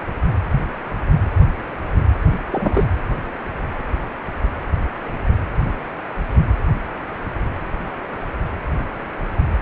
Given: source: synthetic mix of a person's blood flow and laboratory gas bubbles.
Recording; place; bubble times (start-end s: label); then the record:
Doppler ultrasound of blood flow; precordium
2.51-2.84 s: bubbles
From the record:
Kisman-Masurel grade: 113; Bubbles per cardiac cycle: 1 to 2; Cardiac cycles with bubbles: 1 to 10%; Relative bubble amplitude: loud (0.450 to 0.775); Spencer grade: 1 (occasional bubble signal discernible with the cardiac motion signal, with majority of cardiac periods free of bubbles); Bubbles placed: anywhere in the cardiac cycle